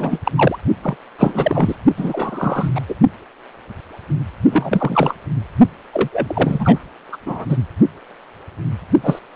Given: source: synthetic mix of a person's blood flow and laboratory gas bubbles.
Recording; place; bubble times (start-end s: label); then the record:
Doppler ultrasound of blood flow; precordium
0.00-0.20 s: bubbles
0.25-0.32 s: bubbles
0.36-0.58 s: bubbles
0.82-0.97 s: bubbles
1.18-1.76 s: bubbles
1.97-2.70 s: bubbles
2.75-2.81 s: bubbles
2.88-2.94 s: bubbles
4.51-5.15 s: bubbles
5.93-6.10 s: bubbles
6.12-6.80 s: bubbles
7.12-7.17 s: bubbles
7.25-7.46 s: bubbles
7.49-7.57 s: bubbles
9.03-9.19 s: bubbles
From the record:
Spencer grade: 3 (all of the cardiac periods contain showers or single bubble signals, but not dominating or overriding the cardiac motion signals); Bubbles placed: only in the low amplitude regions of the cardiac cycle